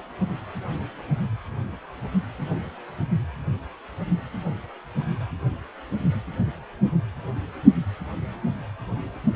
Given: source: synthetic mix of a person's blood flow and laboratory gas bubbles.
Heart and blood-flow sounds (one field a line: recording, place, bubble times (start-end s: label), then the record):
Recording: Doppler ultrasound of blood flow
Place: precordium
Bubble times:
no bubbles
From the record:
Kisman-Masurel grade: 000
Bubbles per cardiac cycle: 0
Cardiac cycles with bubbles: 0%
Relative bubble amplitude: no bubbles discernible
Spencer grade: 0 (complete lack of bubble signals)